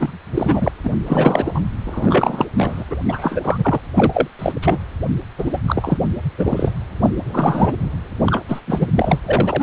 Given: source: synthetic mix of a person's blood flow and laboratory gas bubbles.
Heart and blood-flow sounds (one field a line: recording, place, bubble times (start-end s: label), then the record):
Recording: Doppler ultrasound of blood flow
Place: precordium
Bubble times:
0.00-0.18 s: bubbles
0.34-0.72 s: bubbles
0.84-0.91 s: bubbles
1.05-1.62 s: bubbles
1.84-2.45 s: bubbles
2.57-2.83 s: bubbles
2.90-2.96 s: bubbles
3.08-3.79 s: bubbles
3.94-4.28 s: bubbles
4.39-4.52 s: bubbles
4.62-4.79 s: bubbles
5.38-5.61 s: bubbles
5.67-5.98 s: bubbles
6.38-6.72 s: bubbles
7.03-7.11 s: bubbles
7.34-7.75 s: bubbles
8.24-8.42 s: bubbles
8.48-8.61 s: bubbles
8.67-8.88 s: bubbles
8.94-9.18 s: bubbles
9.25-9.63 s: bubbles
From the record:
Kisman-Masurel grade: 343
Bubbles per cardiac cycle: rolling drumbeat, 9 or more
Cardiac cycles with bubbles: 100%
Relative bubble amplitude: loud (0.450 to 0.775)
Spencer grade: 3 (all of the cardiac periods contain showers or single bubble signals, but not dominating or overriding the cardiac motion signals)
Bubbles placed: anywhere in the cardiac cycle